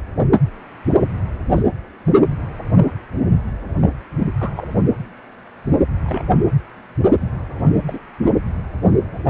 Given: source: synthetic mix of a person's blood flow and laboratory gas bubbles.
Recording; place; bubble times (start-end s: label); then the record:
Doppler ultrasound of blood flow; precordium
1.55-1.62 s: bubbles
3.81-3.89 s: bubbles
4.19-4.29 s: bubbles
4.38-4.50 s: bubbles
4.56-4.68 s: bubbles
6.04-6.24 s: bubbles
7.87-7.99 s: bubbles
From the record:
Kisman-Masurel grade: 121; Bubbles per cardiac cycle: 1 to 2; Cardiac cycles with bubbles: 10 to 50%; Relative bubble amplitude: barely perceptible (0.100 to 0.250); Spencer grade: 2 (many but less than half of the cardiac periods contain bubble signals, singularly or in groups); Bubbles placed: anywhere in the cardiac cycle